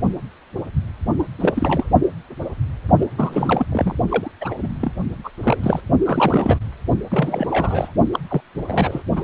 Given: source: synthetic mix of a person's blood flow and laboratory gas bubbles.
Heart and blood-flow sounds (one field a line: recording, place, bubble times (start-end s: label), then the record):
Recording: Doppler ultrasound of blood flow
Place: precordium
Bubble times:
1.19-1.23 s: bubbles
1.40-1.91 s: bubbles
3.00-3.06 s: bubbles
3.17-3.66 s: bubbles
3.71-3.95 s: bubbles
4.09-4.31 s: bubbles
4.41-4.54 s: bubbles
4.62-5.07 s: bubbles
5.24-5.30 s: bubbles
5.37-5.80 s: bubbles
6.05-6.70 s: bubbles
7.11-7.92 s: bubbles
8.13-8.20 s: bubbles
8.29-8.41 s: bubbles
8.68-9.02 s: bubbles
9.15-9.24 s: bubbles
From the record:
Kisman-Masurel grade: 332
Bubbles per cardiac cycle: rolling drumbeat, 9 or more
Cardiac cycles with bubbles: 50 to 99%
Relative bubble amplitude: moderate (0.250 to 0.450)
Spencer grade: 3 (all of the cardiac periods contain showers or single bubble signals, but not dominating or overriding the cardiac motion signals)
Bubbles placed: only in the low amplitude regions of the cardiac cycle